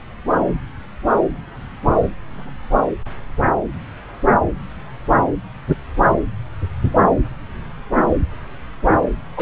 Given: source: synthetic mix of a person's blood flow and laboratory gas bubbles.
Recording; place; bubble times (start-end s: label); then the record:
Doppler ultrasound of blood flow; subclavian vein
9.37-9.42 s: bubbles
From the record:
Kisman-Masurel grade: 122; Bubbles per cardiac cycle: 1 to 2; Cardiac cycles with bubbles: 10 to 50%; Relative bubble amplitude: moderate (0.250 to 0.450); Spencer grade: 2 (many but less than half of the cardiac periods contain bubble signals, singularly or in groups); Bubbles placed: anywhere in the cardiac cycle